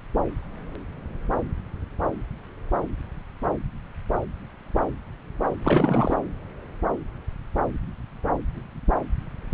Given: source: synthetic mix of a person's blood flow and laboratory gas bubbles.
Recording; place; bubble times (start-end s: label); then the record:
Doppler ultrasound of blood flow; subclavian vein
5.61-6.19 s: bubbles
From the record:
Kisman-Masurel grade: 212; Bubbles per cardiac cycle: several, 3 to 8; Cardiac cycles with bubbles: 1 to 10%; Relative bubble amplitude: moderate (0.250 to 0.450); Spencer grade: 1 (occasional bubble signal discernible with the cardiac motion signal, with majority of cardiac periods free of bubbles); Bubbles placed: anywhere in the cardiac cycle